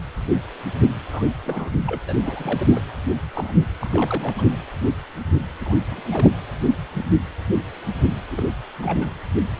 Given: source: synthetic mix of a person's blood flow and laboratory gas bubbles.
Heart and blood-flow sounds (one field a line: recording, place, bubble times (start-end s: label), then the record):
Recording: Doppler ultrasound of blood flow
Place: precordium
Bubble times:
1.08-1.26 s: bubbles
1.28-1.38 s: bubbles
1.45-1.70 s: bubbles
1.86-2.01 s: bubbles
2.07-2.14 s: bubbles
2.21-2.67 s: bubbles
2.72-2.79 s: bubbles
3.33-3.52 s: bubbles
3.81-4.34 s: bubbles
4.38-4.44 s: bubbles
5.59-5.77 s: bubbles
5.91-6.01 s: bubbles
6.12-6.31 s: bubbles
8.30-8.44 s: bubbles
8.80-9.14 s: bubbles
From the record:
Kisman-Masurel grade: 221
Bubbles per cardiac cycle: several, 3 to 8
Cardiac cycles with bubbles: 10 to 50%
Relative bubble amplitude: barely perceptible (0.100 to 0.250)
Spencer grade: 2 (many but less than half of the cardiac periods contain bubble signals, singularly or in groups)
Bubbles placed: anywhere in the cardiac cycle